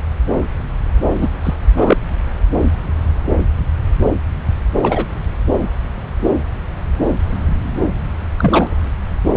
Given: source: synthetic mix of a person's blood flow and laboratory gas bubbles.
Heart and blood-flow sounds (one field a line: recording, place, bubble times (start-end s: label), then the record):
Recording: Doppler ultrasound of blood flow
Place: subclavian vein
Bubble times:
1.10-1.30 s: bubbles
1.44-1.54 s: bubbles
1.77-1.97 s: bubbles
4.82-5.05 s: bubbles
8.38-8.74 s: bubbles
From the record:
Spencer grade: 2 (many but less than half of the cardiac periods contain bubble signals, singularly or in groups)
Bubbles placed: anywhere in the cardiac cycle